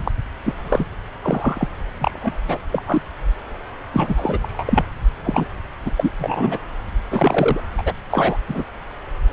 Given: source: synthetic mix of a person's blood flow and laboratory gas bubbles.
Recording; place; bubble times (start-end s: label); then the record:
Doppler ultrasound of blood flow; subclavian vein
0.04-0.11 s: bubbles
0.44-0.54 s: bubbles
0.62-0.84 s: bubbles
0.92-0.95 s: bubbles
1.22-1.68 s: bubbles
2.00-2.38 s: bubbles
2.48-2.58 s: bubbles
2.72-2.83 s: bubbles
2.87-3.02 s: bubbles
3.92-4.38 s: bubbles
4.42-4.84 s: bubbles
5.23-5.46 s: bubbles
5.85-5.90 s: bubbles
5.96-6.11 s: bubbles
6.18-6.59 s: bubbles
7.10-7.61 s: bubbles
7.78-7.82 s: bubbles
7.85-7.92 s: bubbles
8.10-8.38 s: bubbles
8.47-8.63 s: bubbles
From the record:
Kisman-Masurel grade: 242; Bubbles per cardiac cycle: several, 3 to 8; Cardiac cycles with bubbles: 100%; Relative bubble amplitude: moderate (0.250 to 0.450); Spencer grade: 3 (all of the cardiac periods contain showers or single bubble signals, but not dominating or overriding the cardiac motion signals); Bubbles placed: anywhere in the cardiac cycle